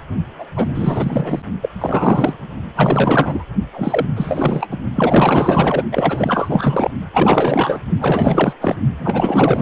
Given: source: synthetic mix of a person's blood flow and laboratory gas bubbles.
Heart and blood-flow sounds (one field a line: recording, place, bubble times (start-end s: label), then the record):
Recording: Doppler ultrasound of blood flow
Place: precordium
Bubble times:
0.38-0.46 s: bubbles
0.56-0.69 s: bubbles
0.74-1.42 s: bubbles
1.61-1.69 s: bubbles
1.80-2.37 s: bubbles
2.75-3.44 s: bubbles
3.71-4.10 s: bubbles
4.16-4.79 s: bubbles
4.95-5.84 s: bubbles
5.92-6.91 s: bubbles
7.13-7.79 s: bubbles
8.01-8.53 s: bubbles
8.60-8.77 s: bubbles
8.98-9.62 s: bubbles
From the record:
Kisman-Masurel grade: 444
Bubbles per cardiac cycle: continuous sound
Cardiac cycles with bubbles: 100%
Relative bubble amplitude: maximal (0.775 to 0.999)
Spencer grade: 4 (maximum detectable bubble signal sounding continuously throughout systole and diastole of every cardiac period, and overriding the amplitude of the normal cardiac signals)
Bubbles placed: only in the low amplitude regions of the cardiac cycle